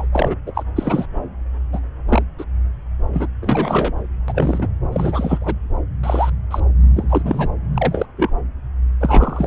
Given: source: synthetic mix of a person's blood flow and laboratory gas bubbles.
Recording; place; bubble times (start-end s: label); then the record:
Doppler ultrasound of blood flow; subclavian vein
0.00-0.06 s: bubbles
0.12-0.34 s: bubbles
0.46-0.52 s: bubbles
0.55-0.63 s: bubbles
0.76-1.06 s: bubbles
1.72-1.80 s: bubbles
2.08-2.22 s: bubbles
2.38-2.44 s: bubbles
3.12-3.28 s: bubbles
3.42-3.92 s: bubbles
4.28-4.68 s: bubbles
4.92-5.54 s: bubbles
6.03-6.29 s: bubbles
6.50-6.60 s: bubbles
6.96-7.22 s: bubbles
7.25-7.49 s: bubbles
7.75-8.06 s: bubbles
8.17-8.30 s: bubbles
9.00-9.47 s: bubbles
From the record:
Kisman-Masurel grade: 243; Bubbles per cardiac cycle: several, 3 to 8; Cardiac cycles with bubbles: 100%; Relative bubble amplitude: loud (0.450 to 0.775); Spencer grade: 3 (all of the cardiac periods contain showers or single bubble signals, but not dominating or overriding the cardiac motion signals); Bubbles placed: anywhere in the cardiac cycle